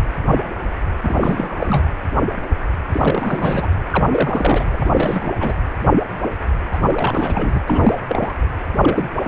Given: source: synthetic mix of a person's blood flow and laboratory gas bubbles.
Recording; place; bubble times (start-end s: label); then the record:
Doppler ultrasound of blood flow; precordium
1.02-1.86 s: bubbles
2.92-3.70 s: bubbles
3.90-4.04 s: bubbles
4.11-4.65 s: bubbles
4.74-4.86 s: bubbles
4.94-5.32 s: bubbles
5.40-5.54 s: bubbles
6.71-6.79 s: bubbles
6.87-7.61 s: bubbles
7.68-7.97 s: bubbles
8.09-8.33 s: bubbles
8.81-9.10 s: bubbles
9.23-9.27 s: bubbles
From the record:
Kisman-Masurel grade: 332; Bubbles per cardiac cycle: rolling drumbeat, 9 or more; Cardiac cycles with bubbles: 50 to 99%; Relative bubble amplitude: moderate (0.250 to 0.450); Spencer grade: 3 (all of the cardiac periods contain showers or single bubble signals, but not dominating or overriding the cardiac motion signals); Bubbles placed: anywhere in the cardiac cycle